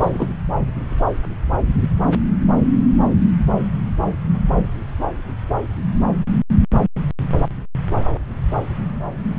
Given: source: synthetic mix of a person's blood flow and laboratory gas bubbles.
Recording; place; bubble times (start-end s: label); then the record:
Doppler ultrasound of blood flow; subclavian vein
0.00-0.09 s: bubbles
0.14-0.29 s: bubbles
From the record:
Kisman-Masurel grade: 113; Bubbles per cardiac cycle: 1 to 2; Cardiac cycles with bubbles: 1 to 10%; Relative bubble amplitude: loud (0.450 to 0.775); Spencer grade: 1 (occasional bubble signal discernible with the cardiac motion signal, with majority of cardiac periods free of bubbles); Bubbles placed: anywhere in the cardiac cycle